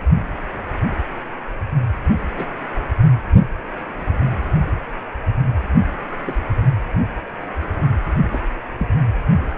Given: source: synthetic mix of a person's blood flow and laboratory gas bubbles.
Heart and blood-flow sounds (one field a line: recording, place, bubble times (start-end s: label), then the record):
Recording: Doppler ultrasound of blood flow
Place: precordium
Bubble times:
2.36-2.45 s: bubbles
6.25-6.34 s: bubbles
8.31-8.40 s: bubbles
8.78-8.88 s: bubbles
From the record:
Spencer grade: 2 (many but less than half of the cardiac periods contain bubble signals, singularly or in groups)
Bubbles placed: only in the low amplitude regions of the cardiac cycle